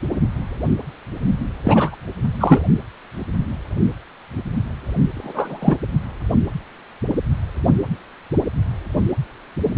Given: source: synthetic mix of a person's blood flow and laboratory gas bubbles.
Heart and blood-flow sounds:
Doppler ultrasound of blood flow; precordium
1.64-1.96 s: bubbles
2.40-2.60 s: bubbles
5.14-5.75 s: bubbles
From the record:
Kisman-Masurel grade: 223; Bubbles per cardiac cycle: several, 3 to 8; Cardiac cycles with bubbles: 10 to 50%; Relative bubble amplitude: loud (0.450 to 0.775); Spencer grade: 2 (many but less than half of the cardiac periods contain bubble signals, singularly or in groups); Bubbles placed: only in the low amplitude regions of the cardiac cycle

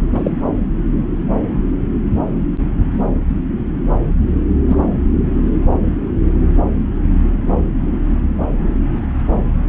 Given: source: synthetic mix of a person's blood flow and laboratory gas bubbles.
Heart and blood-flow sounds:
Doppler ultrasound of blood flow; subclavian vein
0.12-0.32 s: bubbles
4.69-4.79 s: bubbles
From the record:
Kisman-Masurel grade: 123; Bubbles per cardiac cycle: 1 to 2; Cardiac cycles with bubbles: 10 to 50%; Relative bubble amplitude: loud (0.450 to 0.775); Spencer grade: 2 (many but less than half of the cardiac periods contain bubble signals, singularly or in groups); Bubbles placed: anywhere in the cardiac cycle

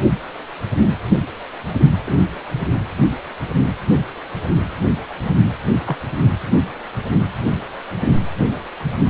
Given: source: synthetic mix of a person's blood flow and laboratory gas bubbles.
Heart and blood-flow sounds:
Doppler ultrasound of blood flow; precordium
2.06-2.19 s: bubbles
5.86-5.97 s: bubbles
From the record:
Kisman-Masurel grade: 122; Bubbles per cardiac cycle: 1 to 2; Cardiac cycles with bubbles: 10 to 50%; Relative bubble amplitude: moderate (0.250 to 0.450); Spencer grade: 2 (many but less than half of the cardiac periods contain bubble signals, singularly or in groups); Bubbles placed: anywhere in the cardiac cycle

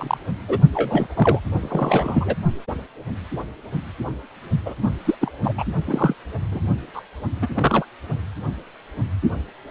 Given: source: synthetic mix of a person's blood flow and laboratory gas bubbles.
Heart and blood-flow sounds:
Doppler ultrasound of blood flow; precordium
0.00-0.18 s: bubbles
0.48-0.59 s: bubbles
0.72-1.07 s: bubbles
1.16-1.40 s: bubbles
1.59-2.36 s: bubbles
4.66-4.75 s: bubbles
4.83-4.90 s: bubbles
5.05-5.15 s: bubbles
5.21-5.32 s: bubbles
5.43-5.54 s: bubbles
5.58-5.64 s: bubbles
5.87-6.14 s: bubbles
6.51-6.61 s: bubbles
6.93-7.02 s: bubbles
7.42-7.49 s: bubbles
7.54-7.85 s: bubbles
From the record:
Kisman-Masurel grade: 232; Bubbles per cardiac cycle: several, 3 to 8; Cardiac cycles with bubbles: 50 to 99%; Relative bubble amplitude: moderate (0.250 to 0.450); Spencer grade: 3 (all of the cardiac periods contain showers or single bubble signals, but not dominating or overriding the cardiac motion signals); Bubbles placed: only in the low amplitude regions of the cardiac cycle

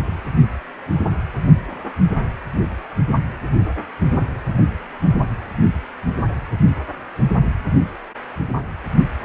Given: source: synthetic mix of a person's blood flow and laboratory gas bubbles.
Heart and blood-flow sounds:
Doppler ultrasound of blood flow; precordium
no bubbles
From the record:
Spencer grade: 0 (complete lack of bubble signals)

